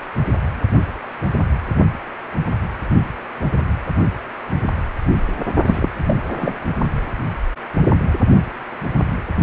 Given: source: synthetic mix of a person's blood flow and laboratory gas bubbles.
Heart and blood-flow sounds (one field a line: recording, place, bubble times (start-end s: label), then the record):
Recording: Doppler ultrasound of blood flow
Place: precordium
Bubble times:
5.66-5.90 s: bubbles
6.06-6.16 s: bubbles
6.29-6.54 s: bubbles
From the record:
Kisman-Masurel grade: 212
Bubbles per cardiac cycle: several, 3 to 8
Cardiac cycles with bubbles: 1 to 10%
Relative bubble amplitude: moderate (0.250 to 0.450)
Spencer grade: 1 (occasional bubble signal discernible with the cardiac motion signal, with majority of cardiac periods free of bubbles)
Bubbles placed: only in the low amplitude regions of the cardiac cycle